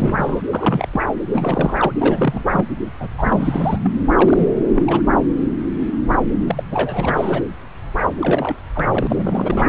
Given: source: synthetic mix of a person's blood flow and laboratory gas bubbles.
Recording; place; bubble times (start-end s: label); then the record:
Doppler ultrasound of blood flow; subclavian vein
0.00-0.42 s: bubbles
0.53-0.87 s: bubbles
0.92-1.01 s: bubbles
1.28-1.93 s: bubbles
1.99-2.66 s: bubbles
3.00-3.08 s: bubbles
3.17-3.79 s: bubbles
3.83-3.90 s: bubbles
4.17-4.47 s: bubbles
4.72-5.03 s: bubbles
6.45-6.63 s: bubbles
6.71-7.44 s: bubbles
8.20-8.56 s: bubbles
8.75-8.85 s: bubbles
8.90-9.69 s: bubbles
From the record:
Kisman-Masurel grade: 332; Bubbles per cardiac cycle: rolling drumbeat, 9 or more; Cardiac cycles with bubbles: 50 to 99%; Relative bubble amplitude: moderate (0.250 to 0.450); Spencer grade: 3 (all of the cardiac periods contain showers or single bubble signals, but not dominating or overriding the cardiac motion signals); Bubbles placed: anywhere in the cardiac cycle